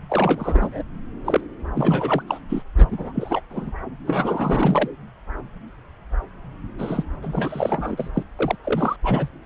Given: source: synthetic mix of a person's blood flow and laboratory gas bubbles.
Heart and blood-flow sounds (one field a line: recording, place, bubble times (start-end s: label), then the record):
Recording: Doppler ultrasound of blood flow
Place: subclavian vein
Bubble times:
0.09-0.83 s: bubbles
1.24-1.41 s: bubbles
1.75-2.23 s: bubbles
2.27-2.40 s: bubbles
2.49-2.62 s: bubbles
2.77-2.88 s: bubbles
2.91-3.12 s: bubbles
3.15-3.42 s: bubbles
3.50-3.72 s: bubbles
4.07-4.88 s: bubbles
6.79-7.04 s: bubbles
7.22-8.11 s: bubbles
8.14-8.23 s: bubbles
8.39-8.56 s: bubbles
8.64-8.96 s: bubbles
9.04-9.29 s: bubbles
From the record:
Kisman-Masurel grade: 332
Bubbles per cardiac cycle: rolling drumbeat, 9 or more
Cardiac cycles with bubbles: 50 to 99%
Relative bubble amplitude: moderate (0.250 to 0.450)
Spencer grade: 3 (all of the cardiac periods contain showers or single bubble signals, but not dominating or overriding the cardiac motion signals)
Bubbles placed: anywhere in the cardiac cycle